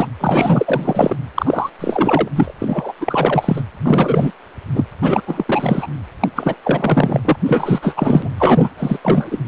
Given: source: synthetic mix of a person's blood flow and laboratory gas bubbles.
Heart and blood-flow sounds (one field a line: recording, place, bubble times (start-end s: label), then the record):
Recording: Doppler ultrasound of blood flow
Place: precordium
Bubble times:
0.00-0.07 s: bubbles
0.20-1.16 s: bubbles
1.35-1.70 s: bubbles
1.79-2.28 s: bubbles
2.35-2.54 s: bubbles
2.59-2.92 s: bubbles
3.00-3.62 s: bubbles
3.83-4.33 s: bubbles
4.75-4.85 s: bubbles
5.01-5.21 s: bubbles
5.26-5.87 s: bubbles
6.20-6.29 s: bubbles
6.35-6.55 s: bubbles
6.63-7.21 s: bubbles
7.25-7.37 s: bubbles
7.46-8.29 s: bubbles
8.39-8.70 s: bubbles
8.77-8.99 s: bubbles
9.03-9.38 s: bubbles
From the record:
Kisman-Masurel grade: 444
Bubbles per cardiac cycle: continuous sound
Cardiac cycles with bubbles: 100%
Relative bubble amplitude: maximal (0.775 to 0.999)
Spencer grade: 4 (maximum detectable bubble signal sounding continuously throughout systole and diastole of every cardiac period, and overriding the amplitude of the normal cardiac signals)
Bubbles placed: anywhere in the cardiac cycle